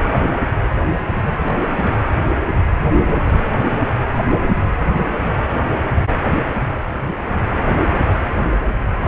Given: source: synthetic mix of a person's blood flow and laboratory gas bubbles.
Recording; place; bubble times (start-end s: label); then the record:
Doppler ultrasound of blood flow; precordium
1.48-1.52 s: bubbles
1.80-1.95 s: bubbles
4.28-4.35 s: bubbles
9.00-9.08 s: bubbles
From the record:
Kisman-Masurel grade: 121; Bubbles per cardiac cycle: 1 to 2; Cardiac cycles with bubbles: 10 to 50%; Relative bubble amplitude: barely perceptible (0.100 to 0.250); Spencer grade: 2 (many but less than half of the cardiac periods contain bubble signals, singularly or in groups); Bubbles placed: anywhere in the cardiac cycle